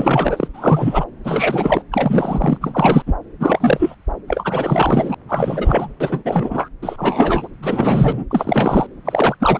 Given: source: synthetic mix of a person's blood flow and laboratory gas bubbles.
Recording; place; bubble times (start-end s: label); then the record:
Doppler ultrasound of blood flow; subclavian vein
0.00-0.48 s: bubbles
0.54-1.06 s: bubbles
1.24-1.84 s: bubbles
1.92-2.58 s: bubbles
2.61-3.02 s: bubbles
3.06-3.14 s: bubbles
3.40-3.95 s: bubbles
4.27-5.14 s: bubbles
5.28-5.90 s: bubbles
6.00-6.68 s: bubbles
6.82-7.47 s: bubbles
7.62-8.25 s: bubbles
8.30-8.87 s: bubbles
9.04-9.36 s: bubbles
9.40-9.59 s: bubbles
From the record:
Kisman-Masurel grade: 343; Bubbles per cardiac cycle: rolling drumbeat, 9 or more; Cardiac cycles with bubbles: 100%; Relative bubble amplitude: loud (0.450 to 0.775); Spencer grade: 3 (all of the cardiac periods contain showers or single bubble signals, but not dominating or overriding the cardiac motion signals); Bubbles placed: anywhere in the cardiac cycle